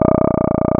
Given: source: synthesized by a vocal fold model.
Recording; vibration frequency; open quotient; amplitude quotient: sustained vowel; 30 Hz; 0.1; 1